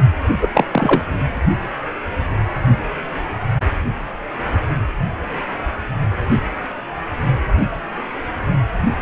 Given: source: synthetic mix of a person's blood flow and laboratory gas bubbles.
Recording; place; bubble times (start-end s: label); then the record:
Doppler ultrasound of blood flow; precordium
0.41-0.49 s: bubbles
0.53-0.64 s: bubbles
0.71-1.02 s: bubbles
From the record:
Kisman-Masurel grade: 213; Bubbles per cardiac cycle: several, 3 to 8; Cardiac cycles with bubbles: 1 to 10%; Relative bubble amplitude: loud (0.450 to 0.775); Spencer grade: 1 (occasional bubble signal discernible with the cardiac motion signal, with majority of cardiac periods free of bubbles); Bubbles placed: anywhere in the cardiac cycle